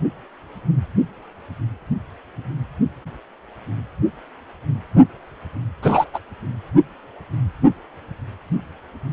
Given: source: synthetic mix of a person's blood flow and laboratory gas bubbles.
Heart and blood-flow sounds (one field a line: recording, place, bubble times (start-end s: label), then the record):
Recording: Doppler ultrasound of blood flow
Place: precordium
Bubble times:
5.82-6.05 s: bubbles
6.13-6.19 s: bubbles
From the record:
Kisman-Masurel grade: 213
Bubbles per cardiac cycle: several, 3 to 8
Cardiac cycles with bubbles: 1 to 10%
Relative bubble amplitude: loud (0.450 to 0.775)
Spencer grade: 1 (occasional bubble signal discernible with the cardiac motion signal, with majority of cardiac periods free of bubbles)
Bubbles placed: only in the low amplitude regions of the cardiac cycle